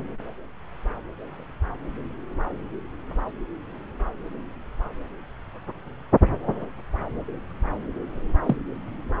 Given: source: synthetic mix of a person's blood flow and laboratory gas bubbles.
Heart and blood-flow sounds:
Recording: Doppler ultrasound of blood flow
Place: subclavian vein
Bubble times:
8.46-8.56 s: bubbles
From the record:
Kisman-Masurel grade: 112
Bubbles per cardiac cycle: 1 to 2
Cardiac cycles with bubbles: 1 to 10%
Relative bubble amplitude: moderate (0.250 to 0.450)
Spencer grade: 1 (occasional bubble signal discernible with the cardiac motion signal, with majority of cardiac periods free of bubbles)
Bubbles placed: anywhere in the cardiac cycle

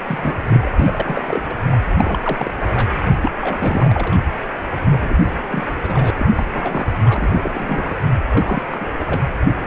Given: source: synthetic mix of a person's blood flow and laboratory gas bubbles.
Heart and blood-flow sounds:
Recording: Doppler ultrasound of blood flow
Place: precordium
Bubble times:
0.00-0.03 s: bubbles
0.08-0.44 s: bubbles
0.50-0.72 s: bubbles
0.79-1.43 s: bubbles
1.49-1.55 s: bubbles
1.67-1.78 s: bubbles
1.97-2.19 s: bubbles
2.23-2.89 s: bubbles
3.06-3.11 s: bubbles
3.21-3.31 s: bubbles
3.40-4.18 s: bubbles
4.74-5.28 s: bubbles
5.45-6.10 s: bubbles
6.17-6.28 s: bubbles
6.37-6.46 s: bubbles
6.51-6.87 s: bubbles
7.05-7.29 s: bubbles
7.32-7.96 s: bubbles
8.10-8.15 s: bubbles
8.30-8.64 s: bubbles
8.70-8.86 s: bubbles
8.89-9.20 s: bubbles
From the record:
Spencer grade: 3 (all of the cardiac periods contain showers or single bubble signals, but not dominating or overriding the cardiac motion signals)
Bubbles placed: anywhere in the cardiac cycle

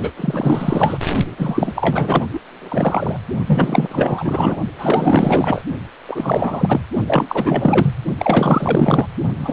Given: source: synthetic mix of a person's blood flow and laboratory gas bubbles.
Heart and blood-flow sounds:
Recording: Doppler ultrasound of blood flow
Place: precordium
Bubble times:
0.00-0.11 s: bubbles
0.16-0.98 s: bubbles
1.37-2.26 s: bubbles
2.32-2.40 s: bubbles
2.50-3.17 s: bubbles
3.47-4.57 s: bubbles
4.78-5.62 s: bubbles
6.08-6.83 s: bubbles
7.07-7.95 s: bubbles
8.18-9.07 s: bubbles
9.38-9.52 s: bubbles
From the record:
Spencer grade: 4 (maximum detectable bubble signal sounding continuously throughout systole and diastole of every cardiac period, and overriding the amplitude of the normal cardiac signals)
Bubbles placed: only in the low amplitude regions of the cardiac cycle

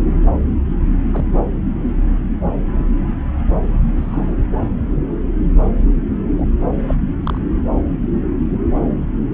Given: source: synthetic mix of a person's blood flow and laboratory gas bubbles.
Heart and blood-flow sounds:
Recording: Doppler ultrasound of blood flow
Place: subclavian vein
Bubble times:
1.11-1.26 s: bubbles
3.95-4.34 s: bubbles
6.38-6.47 s: bubbles
6.87-6.95 s: bubbles
7.23-7.40 s: bubbles
From the record:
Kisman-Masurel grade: 121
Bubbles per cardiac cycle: 1 to 2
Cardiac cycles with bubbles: 10 to 50%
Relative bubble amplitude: barely perceptible (0.100 to 0.250)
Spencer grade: 2 (many but less than half of the cardiac periods contain bubble signals, singularly or in groups)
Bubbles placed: anywhere in the cardiac cycle

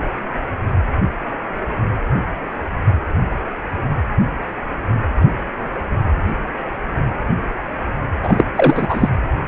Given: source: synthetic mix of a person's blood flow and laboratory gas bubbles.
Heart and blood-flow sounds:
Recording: Doppler ultrasound of blood flow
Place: precordium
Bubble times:
8.23-8.45 s: bubbles
8.55-9.09 s: bubbles
From the record:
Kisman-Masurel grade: 213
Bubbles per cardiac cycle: several, 3 to 8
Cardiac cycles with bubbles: 1 to 10%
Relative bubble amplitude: loud (0.450 to 0.775)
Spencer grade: 1 (occasional bubble signal discernible with the cardiac motion signal, with majority of cardiac periods free of bubbles)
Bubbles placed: anywhere in the cardiac cycle

